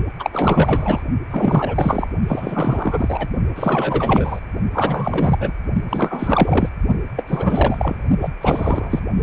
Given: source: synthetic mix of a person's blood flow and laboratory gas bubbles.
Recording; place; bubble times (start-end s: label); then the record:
Doppler ultrasound of blood flow; precordium
0.19-0.30 s: bubbles
0.33-1.03 s: bubbles
1.30-2.08 s: bubbles
2.27-3.28 s: bubbles
3.55-4.40 s: bubbles
4.73-5.52 s: bubbles
5.88-6.70 s: bubbles
7.16-8.04 s: bubbles
8.21-8.29 s: bubbles
8.41-9.00 s: bubbles
9.16-9.22 s: bubbles
From the record:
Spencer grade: 4 (maximum detectable bubble signal sounding continuously throughout systole and diastole of every cardiac period, and overriding the amplitude of the normal cardiac signals); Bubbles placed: only in the low amplitude regions of the cardiac cycle